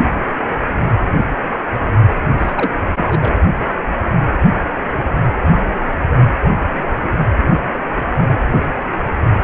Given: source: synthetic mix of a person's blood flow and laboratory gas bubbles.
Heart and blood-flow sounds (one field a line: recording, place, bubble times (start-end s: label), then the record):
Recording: Doppler ultrasound of blood flow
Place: precordium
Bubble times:
2.38-2.75 s: bubbles
2.96-3.32 s: bubbles
From the record:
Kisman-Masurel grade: 212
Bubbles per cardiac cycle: several, 3 to 8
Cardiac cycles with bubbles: 1 to 10%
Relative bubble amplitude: moderate (0.250 to 0.450)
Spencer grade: 1 (occasional bubble signal discernible with the cardiac motion signal, with majority of cardiac periods free of bubbles)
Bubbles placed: anywhere in the cardiac cycle